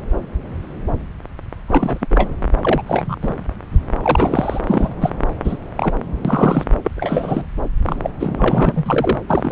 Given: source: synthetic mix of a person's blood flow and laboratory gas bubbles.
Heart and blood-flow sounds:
Doppler ultrasound of blood flow; subclavian vein
1.68-2.06 s: bubbles
2.10-2.29 s: bubbles
2.61-2.83 s: bubbles
2.86-3.16 s: bubbles
3.22-3.33 s: bubbles
4.02-4.61 s: bubbles
4.67-4.94 s: bubbles
5.00-5.10 s: bubbles
5.44-5.58 s: bubbles
5.75-5.94 s: bubbles
6.25-6.63 s: bubbles
6.83-6.91 s: bubbles
6.96-7.46 s: bubbles
7.83-7.96 s: bubbles
8.02-8.10 s: bubbles
8.19-9.18 s: bubbles
9.27-9.52 s: bubbles
From the record:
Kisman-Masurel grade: 233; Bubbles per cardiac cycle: several, 3 to 8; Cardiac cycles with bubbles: 50 to 99%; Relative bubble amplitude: loud (0.450 to 0.775); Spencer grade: 3 (all of the cardiac periods contain showers or single bubble signals, but not dominating or overriding the cardiac motion signals); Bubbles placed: anywhere in the cardiac cycle

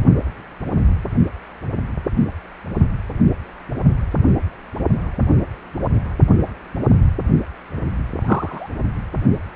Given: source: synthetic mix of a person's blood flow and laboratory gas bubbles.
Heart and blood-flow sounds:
Doppler ultrasound of blood flow; precordium
8.20-8.71 s: bubbles
From the record:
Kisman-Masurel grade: 122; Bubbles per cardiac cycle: 1 to 2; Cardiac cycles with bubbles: 10 to 50%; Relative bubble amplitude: moderate (0.250 to 0.450); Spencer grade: 2 (many but less than half of the cardiac periods contain bubble signals, singularly or in groups); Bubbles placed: only in the low amplitude regions of the cardiac cycle

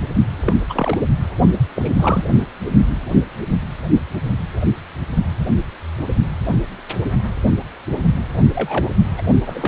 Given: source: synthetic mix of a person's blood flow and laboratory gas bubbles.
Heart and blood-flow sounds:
Doppler ultrasound of blood flow; precordium
0.40-0.54 s: bubbles
0.69-0.98 s: bubbles
1.75-1.90 s: bubbles
1.99-2.25 s: bubbles
8.49-8.90 s: bubbles
9.17-9.21 s: bubbles
9.46-9.68 s: bubbles
From the record:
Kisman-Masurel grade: 222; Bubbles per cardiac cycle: several, 3 to 8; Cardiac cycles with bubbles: 10 to 50%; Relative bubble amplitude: moderate (0.250 to 0.450); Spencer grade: 2 (many but less than half of the cardiac periods contain bubble signals, singularly or in groups); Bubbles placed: only in the low amplitude regions of the cardiac cycle

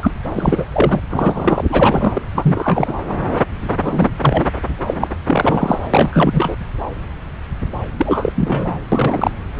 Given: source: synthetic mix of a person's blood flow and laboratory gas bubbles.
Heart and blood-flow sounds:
Doppler ultrasound of blood flow; subclavian vein
0.00-0.11 s: bubbles
0.34-0.66 s: bubbles
0.73-1.00 s: bubbles
1.09-1.65 s: bubbles
1.69-2.22 s: bubbles
2.35-2.94 s: bubbles
3.83-4.10 s: bubbles
4.21-4.46 s: bubbles
4.87-5.08 s: bubbles
5.26-5.79 s: bubbles
5.94-6.56 s: bubbles
7.97-8.33 s: bubbles
8.36-8.79 s: bubbles
8.92-9.31 s: bubbles
From the record:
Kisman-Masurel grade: 333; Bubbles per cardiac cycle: rolling drumbeat, 9 or more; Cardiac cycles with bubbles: 50 to 99%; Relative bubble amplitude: loud (0.450 to 0.775); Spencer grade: 3 (all of the cardiac periods contain showers or single bubble signals, but not dominating or overriding the cardiac motion signals); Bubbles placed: anywhere in the cardiac cycle

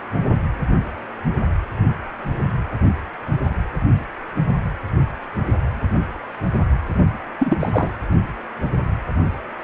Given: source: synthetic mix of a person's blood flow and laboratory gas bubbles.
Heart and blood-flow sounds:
Doppler ultrasound of blood flow; precordium
7.39-7.56 s: bubbles
7.59-7.92 s: bubbles
From the record:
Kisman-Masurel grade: 212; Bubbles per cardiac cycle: several, 3 to 8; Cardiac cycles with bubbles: 1 to 10%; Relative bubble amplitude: moderate (0.250 to 0.450); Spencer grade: 1 (occasional bubble signal discernible with the cardiac motion signal, with majority of cardiac periods free of bubbles); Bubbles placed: anywhere in the cardiac cycle

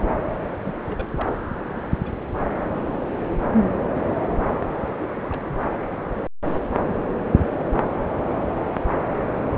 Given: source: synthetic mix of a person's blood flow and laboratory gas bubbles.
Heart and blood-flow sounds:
Doppler ultrasound of blood flow; subclavian vein
0.66-0.74 s: bubbles
0.83-1.10 s: bubbles
1.20-1.36 s: bubbles
1.68-2.17 s: bubbles
4.98-5.08 s: bubbles
5.11-5.79 s: bubbles
9.35-9.48 s: bubbles
From the record:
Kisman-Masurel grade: 221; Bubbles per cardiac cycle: several, 3 to 8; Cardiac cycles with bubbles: 10 to 50%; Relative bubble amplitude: barely perceptible (0.100 to 0.250); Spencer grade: 2 (many but less than half of the cardiac periods contain bubble signals, singularly or in groups); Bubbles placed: anywhere in the cardiac cycle

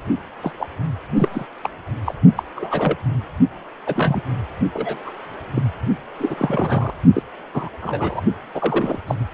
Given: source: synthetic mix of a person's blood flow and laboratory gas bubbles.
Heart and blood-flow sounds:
Doppler ultrasound of blood flow; precordium
0.42-0.51 s: bubbles
0.58-0.67 s: bubbles
1.17-1.28 s: bubbles
1.32-1.46 s: bubbles
1.64-1.70 s: bubbles
2.04-2.14 s: bubbles
2.35-2.43 s: bubbles
2.55-2.96 s: bubbles
3.86-4.22 s: bubbles
4.73-4.96 s: bubbles
5.06-5.12 s: bubbles
5.56-5.62 s: bubbles
6.19-6.94 s: bubbles
7.13-7.23 s: bubbles
7.54-7.69 s: bubbles
7.82-8.21 s: bubbles
8.54-9.00 s: bubbles
9.07-9.15 s: bubbles
From the record:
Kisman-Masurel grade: 242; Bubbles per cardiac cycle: several, 3 to 8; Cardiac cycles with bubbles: 100%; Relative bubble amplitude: moderate (0.250 to 0.450); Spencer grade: 3 (all of the cardiac periods contain showers or single bubble signals, but not dominating or overriding the cardiac motion signals); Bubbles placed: only in the low amplitude regions of the cardiac cycle

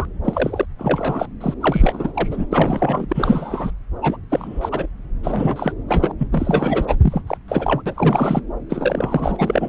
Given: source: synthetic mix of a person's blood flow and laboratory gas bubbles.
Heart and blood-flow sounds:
Doppler ultrasound of blood flow; subclavian vein
0.00-0.05 s: bubbles
0.24-0.66 s: bubbles
0.78-1.27 s: bubbles
1.41-1.54 s: bubbles
1.60-2.46 s: bubbles
2.52-3.06 s: bubbles
3.09-3.71 s: bubbles
4.02-4.17 s: bubbles
4.29-4.86 s: bubbles
5.23-5.72 s: bubbles
5.88-6.12 s: bubbles
6.18-6.28 s: bubbles
6.31-6.95 s: bubbles
7.02-7.22 s: bubbles
7.26-7.38 s: bubbles
7.48-7.81 s: bubbles
7.85-8.41 s: bubbles
8.70-9.69 s: bubbles
From the record:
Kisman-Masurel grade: 343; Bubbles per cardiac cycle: rolling drumbeat, 9 or more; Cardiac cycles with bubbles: 100%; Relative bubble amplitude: loud (0.450 to 0.775); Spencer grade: 3 (all of the cardiac periods contain showers or single bubble signals, but not dominating or overriding the cardiac motion signals); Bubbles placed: anywhere in the cardiac cycle

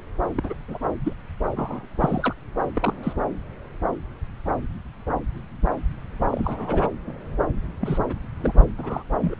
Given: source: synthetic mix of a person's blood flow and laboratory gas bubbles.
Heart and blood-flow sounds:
Doppler ultrasound of blood flow; subclavian vein
0.35-0.54 s: bubbles
0.68-0.78 s: bubbles
1.04-1.14 s: bubbles
1.56-1.88 s: bubbles
2.00-2.35 s: bubbles
2.73-2.94 s: bubbles
3.03-3.13 s: bubbles
6.28-6.87 s: bubbles
7.07-7.13 s: bubbles
7.80-7.98 s: bubbles
8.09-8.13 s: bubbles
8.38-8.63 s: bubbles
8.78-9.04 s: bubbles
9.21-9.36 s: bubbles
From the record:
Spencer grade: 3 (all of the cardiac periods contain showers or single bubble signals, but not dominating or overriding the cardiac motion signals); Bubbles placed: anywhere in the cardiac cycle

